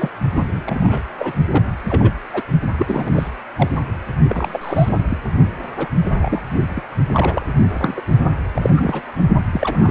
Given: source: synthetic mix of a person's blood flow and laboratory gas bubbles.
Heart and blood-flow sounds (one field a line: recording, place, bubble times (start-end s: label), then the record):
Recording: Doppler ultrasound of blood flow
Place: precordium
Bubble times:
0.00-0.10 s: bubbles
0.34-0.61 s: bubbles
0.65-1.02 s: bubbles
1.18-1.33 s: bubbles
1.48-1.63 s: bubbles
1.89-2.12 s: bubbles
2.29-2.42 s: bubbles
2.78-3.29 s: bubbles
3.56-3.69 s: bubbles
4.28-4.99 s: bubbles
5.09-5.17 s: bubbles
5.78-5.88 s: bubbles
6.16-6.42 s: bubbles
6.69-6.82 s: bubbles
7.07-7.46 s: bubbles
7.70-8.02 s: bubbles
8.54-8.70 s: bubbles
8.76-9.02 s: bubbles
9.53-9.91 s: bubbles
From the record:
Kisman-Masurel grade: 242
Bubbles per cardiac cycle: several, 3 to 8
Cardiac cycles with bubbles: 100%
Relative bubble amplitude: moderate (0.250 to 0.450)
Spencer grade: 3 (all of the cardiac periods contain showers or single bubble signals, but not dominating or overriding the cardiac motion signals)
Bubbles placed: only in the low amplitude regions of the cardiac cycle